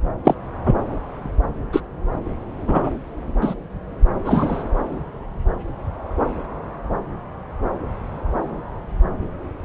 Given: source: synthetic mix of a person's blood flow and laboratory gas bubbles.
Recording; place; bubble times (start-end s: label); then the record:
Doppler ultrasound of blood flow; subclavian vein
0.24-0.34 s: bubbles
0.65-0.74 s: bubbles
1.73-1.81 s: bubbles
2.68-2.91 s: bubbles
3.42-3.54 s: bubbles
4.25-4.63 s: bubbles
From the record:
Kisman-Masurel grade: 123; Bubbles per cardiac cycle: 1 to 2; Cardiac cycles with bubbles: 10 to 50%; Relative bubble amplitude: loud (0.450 to 0.775); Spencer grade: 2 (many but less than half of the cardiac periods contain bubble signals, singularly or in groups); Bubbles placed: anywhere in the cardiac cycle